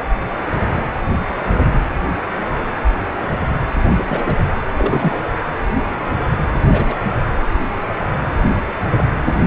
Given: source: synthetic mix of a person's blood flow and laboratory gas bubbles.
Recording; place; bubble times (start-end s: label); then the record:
Doppler ultrasound of blood flow; precordium
3.96-4.04 s: bubbles
4.08-4.34 s: bubbles
4.52-4.57 s: bubbles
4.77-5.28 s: bubbles
6.64-6.96 s: bubbles
8.42-8.52 s: bubbles
8.87-9.06 s: bubbles
From the record:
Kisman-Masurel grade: 222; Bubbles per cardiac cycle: several, 3 to 8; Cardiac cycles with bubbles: 10 to 50%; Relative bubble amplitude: moderate (0.250 to 0.450); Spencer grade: 2 (many but less than half of the cardiac periods contain bubble signals, singularly or in groups); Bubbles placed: anywhere in the cardiac cycle